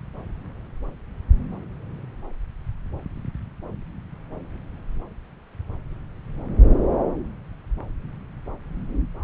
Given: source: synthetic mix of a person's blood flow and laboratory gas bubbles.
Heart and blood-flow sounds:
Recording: Doppler ultrasound of blood flow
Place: subclavian vein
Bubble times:
no bubbles
From the record:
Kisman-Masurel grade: 000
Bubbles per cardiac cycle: 0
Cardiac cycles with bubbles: 0%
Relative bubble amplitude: no bubbles discernible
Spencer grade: 0 (complete lack of bubble signals)

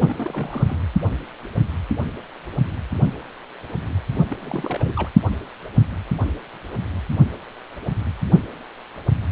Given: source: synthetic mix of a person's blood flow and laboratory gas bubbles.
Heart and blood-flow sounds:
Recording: Doppler ultrasound of blood flow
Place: precordium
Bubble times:
0.00-0.77 s: bubbles
4.30-4.93 s: bubbles
4.96-5.08 s: bubbles
From the record:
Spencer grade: 2 (many but less than half of the cardiac periods contain bubble signals, singularly or in groups)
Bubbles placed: only in the low amplitude regions of the cardiac cycle

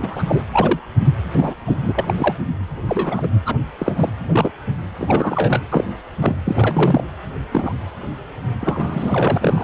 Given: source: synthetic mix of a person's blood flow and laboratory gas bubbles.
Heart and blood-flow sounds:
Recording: Doppler ultrasound of blood flow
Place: precordium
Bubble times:
0.00-0.41 s: bubbles
0.51-0.79 s: bubbles
1.32-1.55 s: bubbles
1.65-2.14 s: bubbles
2.17-2.34 s: bubbles
2.88-3.27 s: bubbles
3.46-3.57 s: bubbles
3.78-4.09 s: bubbles
4.29-4.51 s: bubbles
4.99-5.62 s: bubbles
5.72-5.85 s: bubbles
6.21-6.36 s: bubbles
6.46-7.03 s: bubbles
7.52-7.73 s: bubbles
8.61-9.64 s: bubbles
From the record:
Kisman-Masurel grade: 242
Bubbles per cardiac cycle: several, 3 to 8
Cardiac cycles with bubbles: 100%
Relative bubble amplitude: moderate (0.250 to 0.450)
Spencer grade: 3 (all of the cardiac periods contain showers or single bubble signals, but not dominating or overriding the cardiac motion signals)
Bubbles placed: anywhere in the cardiac cycle

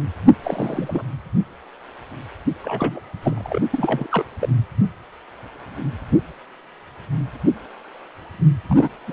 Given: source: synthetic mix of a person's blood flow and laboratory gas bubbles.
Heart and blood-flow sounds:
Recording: Doppler ultrasound of blood flow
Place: precordium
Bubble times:
0.43-1.02 s: bubbles
2.62-3.00 s: bubbles
3.23-3.60 s: bubbles
3.71-4.07 s: bubbles
4.09-4.25 s: bubbles
4.39-4.48 s: bubbles
8.68-8.89 s: bubbles
9.07-9.13 s: bubbles
From the record:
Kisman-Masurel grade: 232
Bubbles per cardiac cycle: several, 3 to 8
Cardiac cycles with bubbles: 50 to 99%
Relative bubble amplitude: moderate (0.250 to 0.450)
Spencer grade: 3 (all of the cardiac periods contain showers or single bubble signals, but not dominating or overriding the cardiac motion signals)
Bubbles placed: only in the low amplitude regions of the cardiac cycle

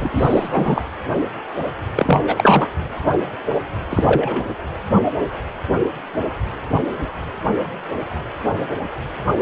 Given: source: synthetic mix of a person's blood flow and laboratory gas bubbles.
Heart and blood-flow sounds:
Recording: Doppler ultrasound of blood flow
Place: precordium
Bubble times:
0.00-0.81 s: bubbles
1.95-2.69 s: bubbles
3.90-4.45 s: bubbles
From the record:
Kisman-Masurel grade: 223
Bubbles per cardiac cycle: several, 3 to 8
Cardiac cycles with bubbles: 10 to 50%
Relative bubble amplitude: loud (0.450 to 0.775)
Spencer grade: 2 (many but less than half of the cardiac periods contain bubble signals, singularly or in groups)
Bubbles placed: anywhere in the cardiac cycle

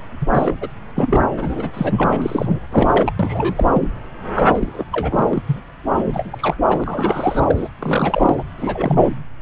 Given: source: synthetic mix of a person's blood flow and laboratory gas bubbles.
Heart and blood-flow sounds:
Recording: Doppler ultrasound of blood flow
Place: subclavian vein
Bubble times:
0.20-0.26 s: bubbles
0.34-0.57 s: bubbles
0.61-0.68 s: bubbles
0.96-1.17 s: bubbles
1.37-1.71 s: bubbles
1.74-2.59 s: bubbles
2.69-3.12 s: bubbles
3.19-3.67 s: bubbles
3.73-3.87 s: bubbles
4.33-4.85 s: bubbles
4.92-5.43 s: bubbles
5.46-5.61 s: bubbles
5.95-6.56 s: bubbles
6.69-7.69 s: bubbles
7.79-8.43 s: bubbles
8.57-9.09 s: bubbles
From the record:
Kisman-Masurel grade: 332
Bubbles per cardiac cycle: rolling drumbeat, 9 or more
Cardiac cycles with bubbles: 50 to 99%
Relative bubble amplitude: moderate (0.250 to 0.450)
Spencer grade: 3 (all of the cardiac periods contain showers or single bubble signals, but not dominating or overriding the cardiac motion signals)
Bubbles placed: anywhere in the cardiac cycle

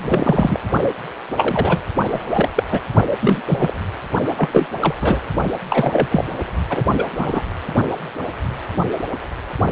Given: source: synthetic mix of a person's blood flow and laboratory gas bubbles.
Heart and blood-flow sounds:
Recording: Doppler ultrasound of blood flow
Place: precordium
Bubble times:
0.03-0.59 s: bubbles
1.37-1.82 s: bubbles
2.10-2.49 s: bubbles
2.56-2.63 s: bubbles
2.70-2.81 s: bubbles
3.19-3.73 s: bubbles
4.38-4.49 s: bubbles
4.51-4.66 s: bubbles
4.80-4.93 s: bubbles
5.00-5.20 s: bubbles
5.70-6.08 s: bubbles
6.11-6.25 s: bubbles
6.69-6.83 s: bubbles
6.97-7.05 s: bubbles
7.17-7.42 s: bubbles
From the record:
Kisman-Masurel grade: 232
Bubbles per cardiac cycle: several, 3 to 8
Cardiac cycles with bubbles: 50 to 99%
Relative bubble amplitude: moderate (0.250 to 0.450)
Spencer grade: 3 (all of the cardiac periods contain showers or single bubble signals, but not dominating or overriding the cardiac motion signals)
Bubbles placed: only in the low amplitude regions of the cardiac cycle

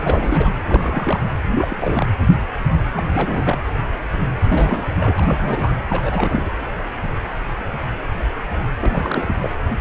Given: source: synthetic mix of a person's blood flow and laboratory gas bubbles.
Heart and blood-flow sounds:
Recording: Doppler ultrasound of blood flow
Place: precordium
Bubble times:
0.00-0.50 s: bubbles
0.66-1.22 s: bubbles
1.49-2.06 s: bubbles
2.96-3.03 s: bubbles
3.12-3.58 s: bubbles
4.50-4.94 s: bubbles
4.99-5.75 s: bubbles
5.89-6.50 s: bubbles
8.81-9.36 s: bubbles
9.41-9.50 s: bubbles
From the record:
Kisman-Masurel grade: 332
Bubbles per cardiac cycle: rolling drumbeat, 9 or more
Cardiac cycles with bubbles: 50 to 99%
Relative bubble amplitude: moderate (0.250 to 0.450)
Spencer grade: 3 (all of the cardiac periods contain showers or single bubble signals, but not dominating or overriding the cardiac motion signals)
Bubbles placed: anywhere in the cardiac cycle

